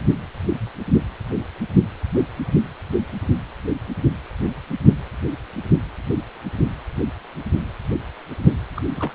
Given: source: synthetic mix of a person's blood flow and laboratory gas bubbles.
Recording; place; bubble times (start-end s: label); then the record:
Doppler ultrasound of blood flow; precordium
8.76-8.81 s: bubbles
8.96-9.12 s: bubbles
From the record:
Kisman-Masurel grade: 211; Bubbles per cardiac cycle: several, 3 to 8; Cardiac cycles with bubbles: 1 to 10%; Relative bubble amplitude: barely perceptible (0.100 to 0.250); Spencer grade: 1 (occasional bubble signal discernible with the cardiac motion signal, with majority of cardiac periods free of bubbles); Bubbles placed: anywhere in the cardiac cycle